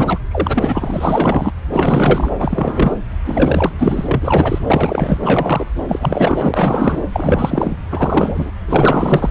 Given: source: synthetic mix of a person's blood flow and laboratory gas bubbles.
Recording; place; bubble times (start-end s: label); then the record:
Doppler ultrasound of blood flow; subclavian vein
0.00-0.19 s: bubbles
0.31-1.52 s: bubbles
1.73-2.30 s: bubbles
2.37-2.94 s: bubbles
3.25-3.72 s: bubbles
3.79-4.58 s: bubbles
4.67-5.19 s: bubbles
5.22-5.66 s: bubbles
5.89-6.99 s: bubbles
7.12-7.76 s: bubbles
7.90-8.51 s: bubbles
8.68-9.31 s: bubbles
From the record:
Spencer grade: 4 (maximum detectable bubble signal sounding continuously throughout systole and diastole of every cardiac period, and overriding the amplitude of the normal cardiac signals); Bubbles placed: anywhere in the cardiac cycle